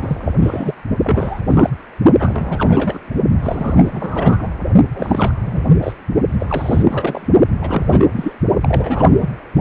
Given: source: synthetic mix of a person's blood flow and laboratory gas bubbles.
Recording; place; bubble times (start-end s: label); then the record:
Doppler ultrasound of blood flow; precordium
0.00-0.32 s: bubbles
0.41-0.74 s: bubbles
1.03-1.42 s: bubbles
1.49-1.70 s: bubbles
2.19-2.99 s: bubbles
3.42-4.49 s: bubbles
4.94-5.33 s: bubbles
5.41-5.63 s: bubbles
5.81-5.93 s: bubbles
6.39-7.28 s: bubbles
7.61-8.08 s: bubbles
8.14-8.33 s: bubbles
8.62-9.14 s: bubbles
9.20-9.29 s: bubbles
From the record:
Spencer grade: 3 (all of the cardiac periods contain showers or single bubble signals, but not dominating or overriding the cardiac motion signals); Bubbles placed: only in the low amplitude regions of the cardiac cycle